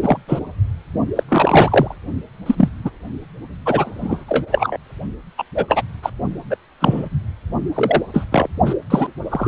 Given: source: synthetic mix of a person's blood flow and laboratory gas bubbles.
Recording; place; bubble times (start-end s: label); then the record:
Doppler ultrasound of blood flow; precordium
0.02-0.17 s: bubbles
0.27-0.39 s: bubbles
1.16-1.24 s: bubbles
1.29-1.96 s: bubbles
2.46-2.69 s: bubbles
2.85-2.91 s: bubbles
3.65-4.77 s: bubbles
5.38-5.43 s: bubbles
5.54-5.82 s: bubbles
6.02-6.10 s: bubbles
6.50-6.56 s: bubbles
6.80-7.09 s: bubbles
7.75-8.03 s: bubbles
8.13-8.25 s: bubbles
8.32-8.47 s: bubbles
8.66-8.74 s: bubbles
8.90-9.07 s: bubbles
9.30-9.48 s: bubbles
From the record:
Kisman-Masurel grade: 243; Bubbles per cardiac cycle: several, 3 to 8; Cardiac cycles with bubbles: 100%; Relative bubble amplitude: loud (0.450 to 0.775); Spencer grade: 3 (all of the cardiac periods contain showers or single bubble signals, but not dominating or overriding the cardiac motion signals); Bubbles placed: only in the low amplitude regions of the cardiac cycle